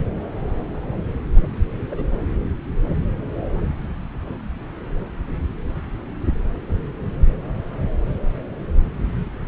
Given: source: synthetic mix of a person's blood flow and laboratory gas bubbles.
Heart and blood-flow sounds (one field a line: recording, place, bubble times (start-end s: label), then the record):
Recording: Doppler ultrasound of blood flow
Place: subclavian vein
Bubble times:
1.89-2.21 s: bubbles
From the record:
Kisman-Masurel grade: 111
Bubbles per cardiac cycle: 1 to 2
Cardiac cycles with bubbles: 1 to 10%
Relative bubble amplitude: barely perceptible (0.100 to 0.250)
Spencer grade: 1 (occasional bubble signal discernible with the cardiac motion signal, with majority of cardiac periods free of bubbles)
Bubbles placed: anywhere in the cardiac cycle